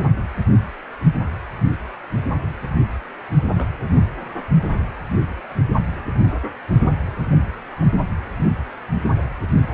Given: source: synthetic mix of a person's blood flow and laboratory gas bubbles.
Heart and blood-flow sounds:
Doppler ultrasound of blood flow; precordium
3.54-3.70 s: bubbles
From the record:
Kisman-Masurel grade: 122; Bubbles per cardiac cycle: 1 to 2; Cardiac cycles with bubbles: 10 to 50%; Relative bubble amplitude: moderate (0.250 to 0.450); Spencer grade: 2 (many but less than half of the cardiac periods contain bubble signals, singularly or in groups); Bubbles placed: only in the low amplitude regions of the cardiac cycle

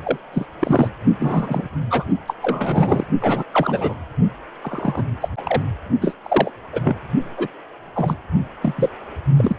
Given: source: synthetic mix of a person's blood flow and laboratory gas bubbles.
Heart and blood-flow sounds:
Doppler ultrasound of blood flow; precordium
0.03-0.18 s: bubbles
0.33-0.46 s: bubbles
0.59-0.88 s: bubbles
1.20-1.69 s: bubbles
1.90-2.04 s: bubbles
2.27-2.34 s: bubbles
2.40-3.06 s: bubbles
3.21-3.43 s: bubbles
3.51-3.96 s: bubbles
4.62-5.04 s: bubbles
5.21-5.29 s: bubbles
5.37-5.42 s: bubbles
5.45-5.62 s: bubbles
6.01-6.15 s: bubbles
6.24-6.50 s: bubbles
6.73-6.81 s: bubbles
6.83-6.97 s: bubbles
7.38-7.48 s: bubbles
7.94-8.16 s: bubbles
8.62-8.89 s: bubbles
9.37-9.56 s: bubbles
From the record:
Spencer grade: 3 (all of the cardiac periods contain showers or single bubble signals, but not dominating or overriding the cardiac motion signals); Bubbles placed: only in the low amplitude regions of the cardiac cycle

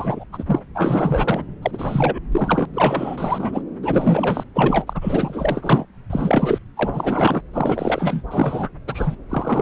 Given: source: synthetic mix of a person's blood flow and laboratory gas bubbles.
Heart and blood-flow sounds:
Doppler ultrasound of blood flow; subclavian vein
0.00-0.24 s: bubbles
0.32-0.60 s: bubbles
0.74-1.43 s: bubbles
1.62-2.19 s: bubbles
2.31-2.65 s: bubbles
2.73-3.62 s: bubbles
3.83-4.43 s: bubbles
4.54-5.85 s: bubbles
6.09-6.58 s: bubbles
6.76-7.42 s: bubbles
7.53-8.22 s: bubbles
8.26-8.70 s: bubbles
8.87-9.16 s: bubbles
9.29-9.62 s: bubbles
From the record:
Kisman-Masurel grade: 444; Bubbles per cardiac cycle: continuous sound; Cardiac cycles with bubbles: 100%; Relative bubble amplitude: maximal (0.775 to 0.999); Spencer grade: 4 (maximum detectable bubble signal sounding continuously throughout systole and diastole of every cardiac period, and overriding the amplitude of the normal cardiac signals); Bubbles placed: anywhere in the cardiac cycle

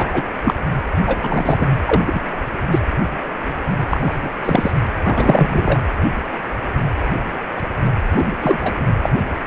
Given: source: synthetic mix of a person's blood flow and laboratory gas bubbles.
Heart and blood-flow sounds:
Doppler ultrasound of blood flow; precordium
0.00-0.26 s: bubbles
0.43-0.54 s: bubbles
1.06-1.17 s: bubbles
1.23-1.67 s: bubbles
1.85-2.21 s: bubbles
2.71-2.79 s: bubbles
3.90-4.29 s: bubbles
4.45-4.72 s: bubbles
5.04-5.81 s: bubbles
8.17-8.24 s: bubbles
8.41-8.60 s: bubbles
8.63-8.74 s: bubbles
9.02-9.09 s: bubbles
From the record:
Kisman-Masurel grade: 233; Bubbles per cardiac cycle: several, 3 to 8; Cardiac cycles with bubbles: 50 to 99%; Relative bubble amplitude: loud (0.450 to 0.775); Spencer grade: 3 (all of the cardiac periods contain showers or single bubble signals, but not dominating or overriding the cardiac motion signals); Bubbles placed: anywhere in the cardiac cycle

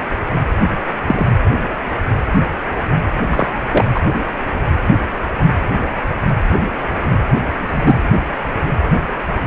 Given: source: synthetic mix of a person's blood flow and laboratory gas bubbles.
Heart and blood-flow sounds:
Doppler ultrasound of blood flow; precordium
1.07-1.27 s: bubbles
3.30-3.47 s: bubbles
3.72-3.85 s: bubbles
3.94-4.00 s: bubbles
7.47-7.98 s: bubbles
From the record:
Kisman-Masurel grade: 123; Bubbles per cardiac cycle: 1 to 2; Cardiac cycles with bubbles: 10 to 50%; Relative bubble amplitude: loud (0.450 to 0.775); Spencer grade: 2 (many but less than half of the cardiac periods contain bubble signals, singularly or in groups); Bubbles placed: anywhere in the cardiac cycle

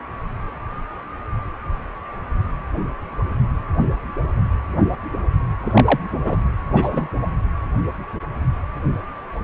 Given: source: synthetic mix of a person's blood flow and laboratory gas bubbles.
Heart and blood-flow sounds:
Doppler ultrasound of blood flow; precordium
5.60-6.00 s: bubbles
6.23-6.36 s: bubbles
6.73-7.09 s: bubbles
From the record:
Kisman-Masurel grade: 223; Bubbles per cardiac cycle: several, 3 to 8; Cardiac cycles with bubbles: 10 to 50%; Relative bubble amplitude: loud (0.450 to 0.775); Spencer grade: 2 (many but less than half of the cardiac periods contain bubble signals, singularly or in groups); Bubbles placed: anywhere in the cardiac cycle

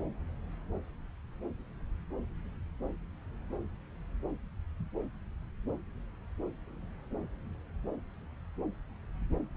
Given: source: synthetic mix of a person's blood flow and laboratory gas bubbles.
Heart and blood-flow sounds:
Doppler ultrasound of blood flow; subclavian vein
no bubbles
From the record:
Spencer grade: 0 (complete lack of bubble signals)

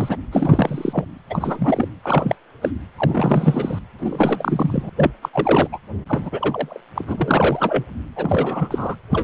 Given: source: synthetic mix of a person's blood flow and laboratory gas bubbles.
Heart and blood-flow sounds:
Doppler ultrasound of blood flow; precordium
0.00-0.16 s: bubbles
0.32-1.05 s: bubbles
1.29-1.89 s: bubbles
2.04-2.35 s: bubbles
2.61-2.71 s: bubbles
2.96-3.79 s: bubbles
3.98-4.90 s: bubbles
4.96-5.12 s: bubbles
5.22-5.29 s: bubbles
5.33-5.68 s: bubbles
5.72-5.78 s: bubbles
6.07-6.81 s: bubbles
6.95-7.05 s: bubbles
7.08-7.84 s: bubbles
8.16-8.96 s: bubbles
9.10-9.23 s: bubbles
From the record:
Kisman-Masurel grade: 342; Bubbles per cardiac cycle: rolling drumbeat, 9 or more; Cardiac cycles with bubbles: 100%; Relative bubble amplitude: moderate (0.250 to 0.450); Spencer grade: 3 (all of the cardiac periods contain showers or single bubble signals, but not dominating or overriding the cardiac motion signals); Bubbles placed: anywhere in the cardiac cycle

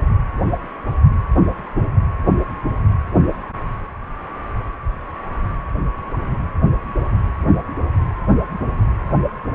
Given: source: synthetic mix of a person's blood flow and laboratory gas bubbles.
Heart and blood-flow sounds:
Doppler ultrasound of blood flow; precordium
no bubbles
From the record:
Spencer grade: 0 (complete lack of bubble signals)

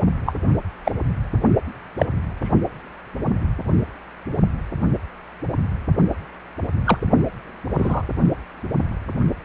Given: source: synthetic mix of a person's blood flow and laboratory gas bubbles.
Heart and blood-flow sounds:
Doppler ultrasound of blood flow; precordium
0.26-0.32 s: bubbles
0.85-0.91 s: bubbles
1.98-2.06 s: bubbles
2.41-2.49 s: bubbles
6.84-6.97 s: bubbles
7.77-8.02 s: bubbles
From the record:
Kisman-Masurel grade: 122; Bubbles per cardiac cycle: 1 to 2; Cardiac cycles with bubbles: 10 to 50%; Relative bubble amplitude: moderate (0.250 to 0.450); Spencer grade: 2 (many but less than half of the cardiac periods contain bubble signals, singularly or in groups); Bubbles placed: only in the low amplitude regions of the cardiac cycle

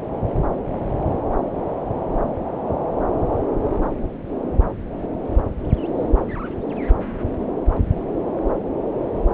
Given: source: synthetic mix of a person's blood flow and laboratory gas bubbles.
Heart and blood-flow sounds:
Doppler ultrasound of blood flow; subclavian vein
no bubbles
From the record:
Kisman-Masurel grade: 000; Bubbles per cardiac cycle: 0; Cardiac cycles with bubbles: 0%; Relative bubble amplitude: no bubbles discernible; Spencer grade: 0 (complete lack of bubble signals)

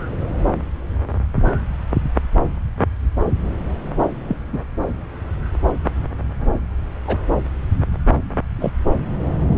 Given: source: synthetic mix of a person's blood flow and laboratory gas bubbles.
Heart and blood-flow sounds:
Doppler ultrasound of blood flow; subclavian vein
4.28-4.37 s: bubbles
4.53-4.59 s: bubbles
7.07-7.17 s: bubbles
8.59-8.73 s: bubbles
From the record:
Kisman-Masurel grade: 122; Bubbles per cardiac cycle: 1 to 2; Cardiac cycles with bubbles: 10 to 50%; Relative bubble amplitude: moderate (0.250 to 0.450); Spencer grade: 2 (many but less than half of the cardiac periods contain bubble signals, singularly or in groups); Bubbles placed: anywhere in the cardiac cycle

